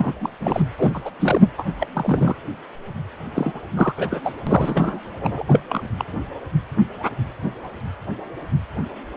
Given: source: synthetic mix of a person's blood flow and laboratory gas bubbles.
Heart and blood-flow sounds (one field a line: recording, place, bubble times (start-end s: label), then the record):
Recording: Doppler ultrasound of blood flow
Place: precordium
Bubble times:
0.00-0.32 s: bubbles
0.41-0.63 s: bubbles
0.78-1.10 s: bubbles
1.19-1.44 s: bubbles
1.56-1.67 s: bubbles
1.79-1.88 s: bubbles
1.94-2.35 s: bubbles
3.33-3.60 s: bubbles
3.76-3.93 s: bubbles
3.97-4.21 s: bubbles
4.24-4.33 s: bubbles
4.47-5.00 s: bubbles
5.21-5.60 s: bubbles
5.69-5.83 s: bubbles
5.99-6.05 s: bubbles
From the record:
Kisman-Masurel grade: 332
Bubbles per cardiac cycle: rolling drumbeat, 9 or more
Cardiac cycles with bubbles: 50 to 99%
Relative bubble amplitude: moderate (0.250 to 0.450)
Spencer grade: 3 (all of the cardiac periods contain showers or single bubble signals, but not dominating or overriding the cardiac motion signals)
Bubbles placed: anywhere in the cardiac cycle